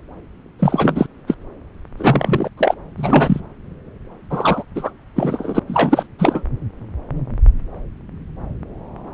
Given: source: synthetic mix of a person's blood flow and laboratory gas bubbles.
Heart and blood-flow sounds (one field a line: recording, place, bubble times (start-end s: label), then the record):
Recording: Doppler ultrasound of blood flow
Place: subclavian vein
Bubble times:
0.59-1.06 s: bubbles
1.27-1.35 s: bubbles
1.97-2.49 s: bubbles
2.57-2.75 s: bubbles
2.97-3.40 s: bubbles
4.30-4.63 s: bubbles
4.75-4.91 s: bubbles
5.15-5.59 s: bubbles
5.67-6.07 s: bubbles
6.18-6.44 s: bubbles
From the record:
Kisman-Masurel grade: 333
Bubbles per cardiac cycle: rolling drumbeat, 9 or more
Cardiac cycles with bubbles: 50 to 99%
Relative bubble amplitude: loud (0.450 to 0.775)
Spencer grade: 3 (all of the cardiac periods contain showers or single bubble signals, but not dominating or overriding the cardiac motion signals)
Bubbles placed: anywhere in the cardiac cycle